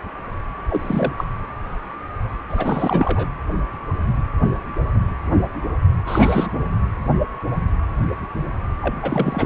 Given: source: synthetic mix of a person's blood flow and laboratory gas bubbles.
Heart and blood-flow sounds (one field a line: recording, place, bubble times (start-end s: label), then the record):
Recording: Doppler ultrasound of blood flow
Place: precordium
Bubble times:
0.69-1.13 s: bubbles
1.18-1.24 s: bubbles
2.50-3.28 s: bubbles
6.06-6.48 s: bubbles
8.81-8.94 s: bubbles
9.02-9.46 s: bubbles
From the record:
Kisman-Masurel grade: 222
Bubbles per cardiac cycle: several, 3 to 8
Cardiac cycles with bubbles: 10 to 50%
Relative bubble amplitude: moderate (0.250 to 0.450)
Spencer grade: 2 (many but less than half of the cardiac periods contain bubble signals, singularly or in groups)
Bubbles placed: anywhere in the cardiac cycle